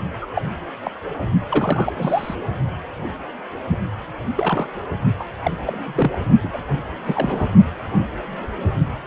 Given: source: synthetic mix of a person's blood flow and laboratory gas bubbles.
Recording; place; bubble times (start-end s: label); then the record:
Doppler ultrasound of blood flow; precordium
0.21-0.26 s: bubbles
0.35-0.42 s: bubbles
0.85-0.91 s: bubbles
1.49-2.36 s: bubbles
4.37-4.67 s: bubbles
5.19-5.25 s: bubbles
5.43-5.51 s: bubbles
5.67-5.78 s: bubbles
5.80-6.18 s: bubbles
6.43-6.61 s: bubbles
7.06-7.50 s: bubbles
From the record:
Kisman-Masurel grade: 232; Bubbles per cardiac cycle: several, 3 to 8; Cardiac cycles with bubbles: 50 to 99%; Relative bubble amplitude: moderate (0.250 to 0.450); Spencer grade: 3 (all of the cardiac periods contain showers or single bubble signals, but not dominating or overriding the cardiac motion signals); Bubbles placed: only in the low amplitude regions of the cardiac cycle